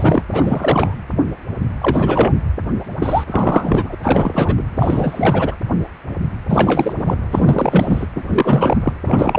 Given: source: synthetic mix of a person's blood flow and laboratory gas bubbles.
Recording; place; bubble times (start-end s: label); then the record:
Doppler ultrasound of blood flow; precordium
0.00-0.23 s: bubbles
0.32-0.95 s: bubbles
1.81-2.33 s: bubbles
3.00-3.95 s: bubbles
4.02-4.63 s: bubbles
4.76-5.55 s: bubbles
6.48-6.93 s: bubbles
6.98-7.17 s: bubbles
7.31-8.07 s: bubbles
8.15-8.24 s: bubbles
8.29-8.93 s: bubbles
9.04-9.39 s: bubbles
From the record:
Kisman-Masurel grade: 333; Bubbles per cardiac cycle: rolling drumbeat, 9 or more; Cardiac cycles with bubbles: 50 to 99%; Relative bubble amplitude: loud (0.450 to 0.775); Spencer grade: 3 (all of the cardiac periods contain showers or single bubble signals, but not dominating or overriding the cardiac motion signals); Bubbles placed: anywhere in the cardiac cycle